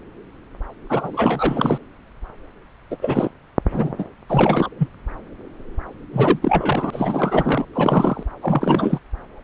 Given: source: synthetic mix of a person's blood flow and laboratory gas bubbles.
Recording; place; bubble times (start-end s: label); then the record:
Doppler ultrasound of blood flow; subclavian vein
0.89-1.78 s: bubbles
2.91-2.97 s: bubbles
3.02-3.30 s: bubbles
3.71-3.92 s: bubbles
3.99-4.05 s: bubbles
4.29-4.69 s: bubbles
4.79-4.88 s: bubbles
6.12-6.39 s: bubbles
6.42-7.65 s: bubbles
7.73-8.23 s: bubbles
8.41-8.98 s: bubbles
From the record:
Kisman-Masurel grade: 332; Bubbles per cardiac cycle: rolling drumbeat, 9 or more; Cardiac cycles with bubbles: 50 to 99%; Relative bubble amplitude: moderate (0.250 to 0.450); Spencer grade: 3 (all of the cardiac periods contain showers or single bubble signals, but not dominating or overriding the cardiac motion signals); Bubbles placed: anywhere in the cardiac cycle